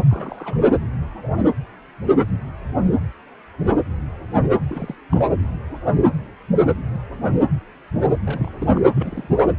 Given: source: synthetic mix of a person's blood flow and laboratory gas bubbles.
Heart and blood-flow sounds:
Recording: Doppler ultrasound of blood flow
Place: precordium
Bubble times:
0.10-0.57 s: bubbles
4.68-4.95 s: bubbles
5.12-5.32 s: bubbles
8.26-8.50 s: bubbles
8.59-8.90 s: bubbles
8.94-9.29 s: bubbles
9.39-9.45 s: bubbles
From the record:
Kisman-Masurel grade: 221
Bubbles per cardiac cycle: several, 3 to 8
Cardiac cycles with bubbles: 10 to 50%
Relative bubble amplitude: barely perceptible (0.100 to 0.250)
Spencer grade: 2 (many but less than half of the cardiac periods contain bubble signals, singularly or in groups)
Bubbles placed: anywhere in the cardiac cycle

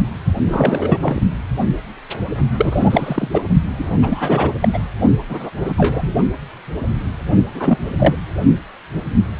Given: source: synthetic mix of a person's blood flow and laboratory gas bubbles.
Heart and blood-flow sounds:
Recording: Doppler ultrasound of blood flow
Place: precordium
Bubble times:
0.46-0.98 s: bubbles
1.01-1.22 s: bubbles
2.57-3.28 s: bubbles
3.32-3.41 s: bubbles
3.78-4.50 s: bubbles
4.61-4.69 s: bubbles
4.73-4.79 s: bubbles
5.29-5.50 s: bubbles
5.57-5.74 s: bubbles
5.78-6.14 s: bubbles
7.54-7.78 s: bubbles
7.98-8.15 s: bubbles
From the record:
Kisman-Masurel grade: 233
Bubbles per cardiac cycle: several, 3 to 8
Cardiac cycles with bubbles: 50 to 99%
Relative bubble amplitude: loud (0.450 to 0.775)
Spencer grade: 3 (all of the cardiac periods contain showers or single bubble signals, but not dominating or overriding the cardiac motion signals)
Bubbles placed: only in the low amplitude regions of the cardiac cycle

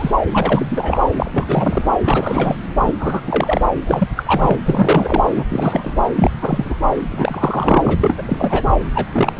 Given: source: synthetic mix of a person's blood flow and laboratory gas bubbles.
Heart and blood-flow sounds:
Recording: Doppler ultrasound of blood flow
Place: subclavian vein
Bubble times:
0.00-0.10 s: bubbles
0.30-1.02 s: bubbles
1.17-1.92 s: bubbles
2.04-2.56 s: bubbles
2.85-2.94 s: bubbles
2.99-3.21 s: bubbles
3.26-3.61 s: bubbles
3.86-4.08 s: bubbles
4.16-4.58 s: bubbles
4.66-5.23 s: bubbles
5.36-5.45 s: bubbles
5.50-5.98 s: bubbles
6.15-6.31 s: bubbles
6.41-6.75 s: bubbles
7.11-8.68 s: bubbles
8.95-9.06 s: bubbles
9.12-9.39 s: bubbles
From the record:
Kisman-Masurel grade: 343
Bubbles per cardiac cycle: rolling drumbeat, 9 or more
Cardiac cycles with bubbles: 100%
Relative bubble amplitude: loud (0.450 to 0.775)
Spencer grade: 3 (all of the cardiac periods contain showers or single bubble signals, but not dominating or overriding the cardiac motion signals)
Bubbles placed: anywhere in the cardiac cycle

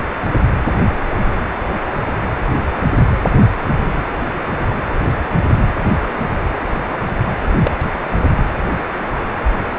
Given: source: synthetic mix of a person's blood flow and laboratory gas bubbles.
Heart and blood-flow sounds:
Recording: Doppler ultrasound of blood flow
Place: precordium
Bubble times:
7.64-7.71 s: bubbles
From the record:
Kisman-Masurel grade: 112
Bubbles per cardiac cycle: 1 to 2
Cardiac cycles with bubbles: 1 to 10%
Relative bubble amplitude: moderate (0.250 to 0.450)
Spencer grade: 1 (occasional bubble signal discernible with the cardiac motion signal, with majority of cardiac periods free of bubbles)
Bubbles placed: anywhere in the cardiac cycle

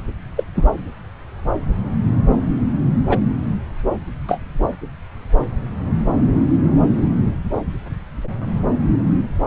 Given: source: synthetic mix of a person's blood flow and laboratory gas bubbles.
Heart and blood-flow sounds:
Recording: Doppler ultrasound of blood flow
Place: subclavian vein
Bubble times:
0.36-0.44 s: bubbles
0.56-0.66 s: bubbles
3.09-3.18 s: bubbles
4.28-4.38 s: bubbles
From the record:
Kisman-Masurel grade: 123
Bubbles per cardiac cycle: 1 to 2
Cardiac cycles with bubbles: 10 to 50%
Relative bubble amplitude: loud (0.450 to 0.775)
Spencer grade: 2 (many but less than half of the cardiac periods contain bubble signals, singularly or in groups)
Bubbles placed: anywhere in the cardiac cycle

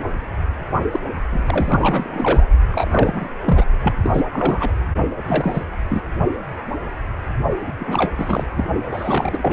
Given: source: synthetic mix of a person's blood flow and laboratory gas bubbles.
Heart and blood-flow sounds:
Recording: Doppler ultrasound of blood flow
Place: precordium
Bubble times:
0.92-0.99 s: bubbles
1.30-2.46 s: bubbles
2.67-3.28 s: bubbles
3.45-3.64 s: bubbles
3.81-3.94 s: bubbles
4.02-4.22 s: bubbles
4.33-4.71 s: bubbles
5.10-5.16 s: bubbles
5.27-5.64 s: bubbles
5.89-6.03 s: bubbles
7.63-7.74 s: bubbles
7.79-8.12 s: bubbles
8.17-8.46 s: bubbles
8.51-8.64 s: bubbles
8.91-9.52 s: bubbles
From the record:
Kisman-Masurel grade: 333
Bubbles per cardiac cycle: rolling drumbeat, 9 or more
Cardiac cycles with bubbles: 50 to 99%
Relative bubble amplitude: loud (0.450 to 0.775)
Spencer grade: 3 (all of the cardiac periods contain showers or single bubble signals, but not dominating or overriding the cardiac motion signals)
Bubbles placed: only in the low amplitude regions of the cardiac cycle

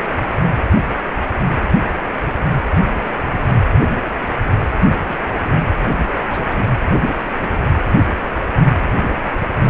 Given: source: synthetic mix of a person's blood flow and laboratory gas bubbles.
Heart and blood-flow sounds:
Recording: Doppler ultrasound of blood flow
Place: precordium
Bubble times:
3.05-3.24 s: bubbles
4.83-5.04 s: bubbles
5.07-5.20 s: bubbles
5.42-5.52 s: bubbles
6.03-6.61 s: bubbles
7.01-7.09 s: bubbles
7.39-7.48 s: bubbles
7.53-7.64 s: bubbles
From the record:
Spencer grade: 2 (many but less than half of the cardiac periods contain bubble signals, singularly or in groups)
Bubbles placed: anywhere in the cardiac cycle

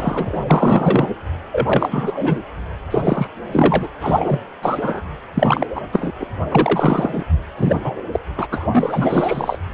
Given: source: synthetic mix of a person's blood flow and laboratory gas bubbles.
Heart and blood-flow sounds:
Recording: Doppler ultrasound of blood flow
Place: precordium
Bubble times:
0.00-0.36 s: bubbles
0.46-1.10 s: bubbles
1.52-2.56 s: bubbles
2.90-3.27 s: bubbles
3.44-3.88 s: bubbles
4.00-4.39 s: bubbles
4.62-5.01 s: bubbles
5.34-5.67 s: bubbles
5.75-5.80 s: bubbles
5.92-6.12 s: bubbles
6.20-6.26 s: bubbles
6.50-7.25 s: bubbles
7.55-7.79 s: bubbles
7.83-7.92 s: bubbles
8.12-8.20 s: bubbles
8.37-8.47 s: bubbles
8.52-8.67 s: bubbles
8.71-9.57 s: bubbles
From the record:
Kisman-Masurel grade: 343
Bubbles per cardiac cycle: rolling drumbeat, 9 or more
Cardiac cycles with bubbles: 100%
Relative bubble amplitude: loud (0.450 to 0.775)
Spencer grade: 3 (all of the cardiac periods contain showers or single bubble signals, but not dominating or overriding the cardiac motion signals)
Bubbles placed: anywhere in the cardiac cycle

